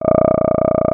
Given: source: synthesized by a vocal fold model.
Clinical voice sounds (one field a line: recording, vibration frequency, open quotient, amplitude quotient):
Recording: sustained vowel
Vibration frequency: 30 Hz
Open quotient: 0.1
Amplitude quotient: 1.4